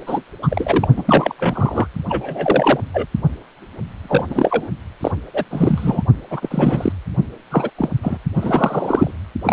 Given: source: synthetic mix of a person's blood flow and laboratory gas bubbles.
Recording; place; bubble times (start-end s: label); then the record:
Doppler ultrasound of blood flow; precordium
0.07-0.22 s: bubbles
0.42-0.88 s: bubbles
0.96-1.03 s: bubbles
1.06-1.34 s: bubbles
1.37-1.87 s: bubbles
2.08-2.80 s: bubbles
2.93-3.06 s: bubbles
4.03-4.68 s: bubbles
5.00-5.12 s: bubbles
5.33-5.45 s: bubbles
5.50-6.02 s: bubbles
6.30-6.92 s: bubbles
7.50-7.71 s: bubbles
7.78-7.91 s: bubbles
8.02-8.18 s: bubbles
8.35-9.11 s: bubbles
9.44-9.53 s: bubbles
From the record:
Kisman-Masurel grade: 243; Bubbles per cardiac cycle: several, 3 to 8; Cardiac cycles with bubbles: 100%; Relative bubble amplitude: loud (0.450 to 0.775); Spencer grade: 3 (all of the cardiac periods contain showers or single bubble signals, but not dominating or overriding the cardiac motion signals); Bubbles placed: only in the low amplitude regions of the cardiac cycle